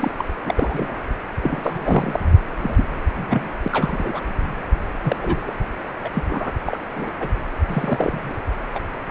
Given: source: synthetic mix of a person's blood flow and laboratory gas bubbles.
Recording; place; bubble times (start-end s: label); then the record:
Doppler ultrasound of blood flow; precordium
0.00-0.11 s: bubbles
0.18-0.25 s: bubbles
0.45-0.99 s: bubbles
1.42-2.19 s: bubbles
2.62-2.84 s: bubbles
3.15-3.48 s: bubbles
3.63-3.68 s: bubbles
3.72-4.20 s: bubbles
5.03-5.16 s: bubbles
5.21-5.51 s: bubbles
6.04-6.08 s: bubbles
6.14-6.26 s: bubbles
6.29-6.52 s: bubbles
6.65-6.79 s: bubbles
6.95-7.10 s: bubbles
7.19-7.33 s: bubbles
7.68-8.36 s: bubbles
8.75-8.79 s: bubbles
9.07-9.10 s: bubbles
From the record:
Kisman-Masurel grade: 242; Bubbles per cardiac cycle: several, 3 to 8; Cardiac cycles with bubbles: 100%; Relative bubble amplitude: moderate (0.250 to 0.450); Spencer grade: 3 (all of the cardiac periods contain showers or single bubble signals, but not dominating or overriding the cardiac motion signals); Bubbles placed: anywhere in the cardiac cycle